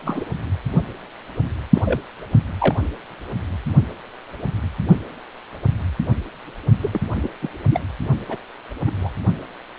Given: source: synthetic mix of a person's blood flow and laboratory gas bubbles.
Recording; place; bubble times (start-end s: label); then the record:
Doppler ultrasound of blood flow; precordium
0.00-0.25 s: bubbles
1.75-1.83 s: bubbles
1.85-2.00 s: bubbles
2.59-2.75 s: bubbles
6.80-6.90 s: bubbles
6.93-7.01 s: bubbles
7.23-7.29 s: bubbles
7.42-7.50 s: bubbles
7.70-7.80 s: bubbles
8.28-8.37 s: bubbles
8.86-8.91 s: bubbles
9.00-9.10 s: bubbles
From the record:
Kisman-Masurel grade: 222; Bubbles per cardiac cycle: several, 3 to 8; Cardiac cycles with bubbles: 10 to 50%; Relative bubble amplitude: moderate (0.250 to 0.450); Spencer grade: 2 (many but less than half of the cardiac periods contain bubble signals, singularly or in groups); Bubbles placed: only in the low amplitude regions of the cardiac cycle